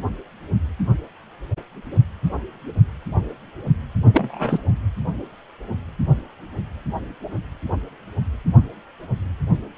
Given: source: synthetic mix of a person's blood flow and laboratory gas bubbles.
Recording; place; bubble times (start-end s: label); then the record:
Doppler ultrasound of blood flow; precordium
4.12-4.58 s: bubbles
From the record:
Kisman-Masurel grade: 212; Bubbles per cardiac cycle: several, 3 to 8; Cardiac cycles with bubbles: 1 to 10%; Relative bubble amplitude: moderate (0.250 to 0.450); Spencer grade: 1 (occasional bubble signal discernible with the cardiac motion signal, with majority of cardiac periods free of bubbles); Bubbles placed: anywhere in the cardiac cycle